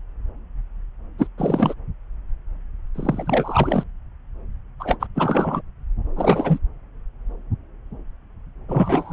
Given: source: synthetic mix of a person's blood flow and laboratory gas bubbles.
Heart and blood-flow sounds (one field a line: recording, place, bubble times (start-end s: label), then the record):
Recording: Doppler ultrasound of blood flow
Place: subclavian vein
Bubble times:
1.18-1.27 s: bubbles
1.38-1.74 s: bubbles
2.94-3.84 s: bubbles
4.79-4.97 s: bubbles
5.00-5.07 s: bubbles
5.14-5.61 s: bubbles
6.16-6.59 s: bubbles
8.68-9.13 s: bubbles
From the record:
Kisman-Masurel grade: 333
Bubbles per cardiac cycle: rolling drumbeat, 9 or more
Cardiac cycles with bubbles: 50 to 99%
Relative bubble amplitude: loud (0.450 to 0.775)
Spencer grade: 3 (all of the cardiac periods contain showers or single bubble signals, but not dominating or overriding the cardiac motion signals)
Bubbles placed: anywhere in the cardiac cycle